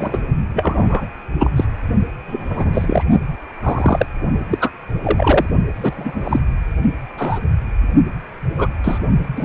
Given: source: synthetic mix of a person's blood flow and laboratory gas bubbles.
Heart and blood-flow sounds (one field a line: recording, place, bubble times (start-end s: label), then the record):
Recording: Doppler ultrasound of blood flow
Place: precordium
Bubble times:
0.00-0.19 s: bubbles
0.54-1.06 s: bubbles
1.40-1.50 s: bubbles
1.56-1.65 s: bubbles
2.27-3.05 s: bubbles
3.62-4.06 s: bubbles
4.50-4.70 s: bubbles
5.04-5.46 s: bubbles
5.74-6.40 s: bubbles
7.17-7.40 s: bubbles
8.58-8.67 s: bubbles
8.84-8.98 s: bubbles
9.36-9.45 s: bubbles
From the record:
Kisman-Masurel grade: 243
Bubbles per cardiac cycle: several, 3 to 8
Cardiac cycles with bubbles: 100%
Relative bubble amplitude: loud (0.450 to 0.775)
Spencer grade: 3 (all of the cardiac periods contain showers or single bubble signals, but not dominating or overriding the cardiac motion signals)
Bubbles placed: only in the low amplitude regions of the cardiac cycle